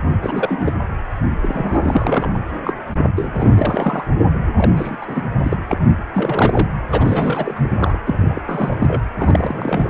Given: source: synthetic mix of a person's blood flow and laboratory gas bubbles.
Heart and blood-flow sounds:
Doppler ultrasound of blood flow; precordium
0.21-0.74 s: bubbles
1.42-2.38 s: bubbles
2.65-2.73 s: bubbles
3.16-4.06 s: bubbles
4.17-4.26 s: bubbles
4.57-4.71 s: bubbles
4.75-4.96 s: bubbles
5.01-5.22 s: bubbles
5.43-5.58 s: bubbles
5.69-5.80 s: bubbles
6.14-6.68 s: bubbles
6.90-7.99 s: bubbles
8.05-8.42 s: bubbles
8.46-9.02 s: bubbles
9.17-9.90 s: bubbles
From the record:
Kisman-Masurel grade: 342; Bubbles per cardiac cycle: rolling drumbeat, 9 or more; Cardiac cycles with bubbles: 100%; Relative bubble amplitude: moderate (0.250 to 0.450); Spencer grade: 3 (all of the cardiac periods contain showers or single bubble signals, but not dominating or overriding the cardiac motion signals); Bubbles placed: anywhere in the cardiac cycle

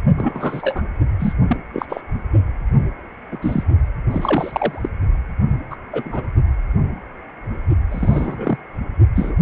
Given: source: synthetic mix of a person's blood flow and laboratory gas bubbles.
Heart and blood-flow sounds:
Doppler ultrasound of blood flow; precordium
0.15-0.82 s: bubbles
1.19-1.33 s: bubbles
1.48-1.56 s: bubbles
1.73-1.85 s: bubbles
1.89-2.01 s: bubbles
3.31-3.38 s: bubbles
3.42-3.64 s: bubbles
4.11-4.89 s: bubbles
5.70-5.75 s: bubbles
5.92-6.27 s: bubbles
7.91-8.56 s: bubbles
9.15-9.36 s: bubbles
From the record:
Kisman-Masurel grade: 232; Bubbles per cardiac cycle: several, 3 to 8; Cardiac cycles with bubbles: 50 to 99%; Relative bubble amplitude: moderate (0.250 to 0.450); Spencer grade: 3 (all of the cardiac periods contain showers or single bubble signals, but not dominating or overriding the cardiac motion signals); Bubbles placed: only in the low amplitude regions of the cardiac cycle

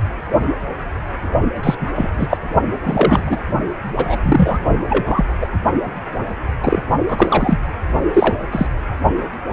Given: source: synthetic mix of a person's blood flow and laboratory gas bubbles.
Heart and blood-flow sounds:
Doppler ultrasound of blood flow; precordium
1.63-1.75 s: bubbles
1.80-1.89 s: bubbles
1.95-2.10 s: bubbles
2.18-2.37 s: bubbles
2.83-3.38 s: bubbles
3.96-4.17 s: bubbles
4.22-4.58 s: bubbles
4.89-5.25 s: bubbles
5.40-5.46 s: bubbles
6.63-6.83 s: bubbles
7.08-7.59 s: bubbles
8.13-8.35 s: bubbles
8.51-8.66 s: bubbles
From the record:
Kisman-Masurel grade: 233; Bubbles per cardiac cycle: several, 3 to 8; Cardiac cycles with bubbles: 50 to 99%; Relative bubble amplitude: loud (0.450 to 0.775); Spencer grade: 3 (all of the cardiac periods contain showers or single bubble signals, but not dominating or overriding the cardiac motion signals); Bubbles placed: only in the low amplitude regions of the cardiac cycle

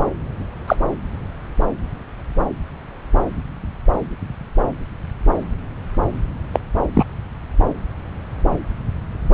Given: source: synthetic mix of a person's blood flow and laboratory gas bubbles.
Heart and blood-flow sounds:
Doppler ultrasound of blood flow; subclavian vein
0.68-0.76 s: bubbles
6.53-6.59 s: bubbles
6.93-7.04 s: bubbles
From the record:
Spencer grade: 2 (many but less than half of the cardiac periods contain bubble signals, singularly or in groups); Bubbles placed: anywhere in the cardiac cycle

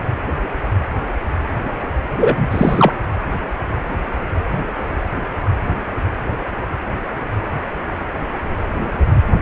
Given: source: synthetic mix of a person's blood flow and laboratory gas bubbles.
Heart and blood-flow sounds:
Doppler ultrasound of blood flow; precordium
2.16-2.92 s: bubbles
From the record:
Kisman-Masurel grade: 213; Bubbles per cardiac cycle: several, 3 to 8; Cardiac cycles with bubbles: 1 to 10%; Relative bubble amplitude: loud (0.450 to 0.775); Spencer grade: 1 (occasional bubble signal discernible with the cardiac motion signal, with majority of cardiac periods free of bubbles); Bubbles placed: anywhere in the cardiac cycle

